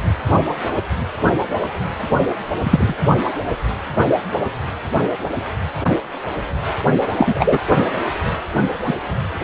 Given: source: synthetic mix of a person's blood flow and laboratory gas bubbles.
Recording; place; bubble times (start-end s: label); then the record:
Doppler ultrasound of blood flow; precordium
2.64-2.96 s: bubbles
7.18-7.59 s: bubbles
8.85-8.94 s: bubbles
From the record:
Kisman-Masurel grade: 123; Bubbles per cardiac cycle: 1 to 2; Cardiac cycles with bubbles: 10 to 50%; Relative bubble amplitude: loud (0.450 to 0.775); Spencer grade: 2 (many but less than half of the cardiac periods contain bubble signals, singularly or in groups); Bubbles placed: anywhere in the cardiac cycle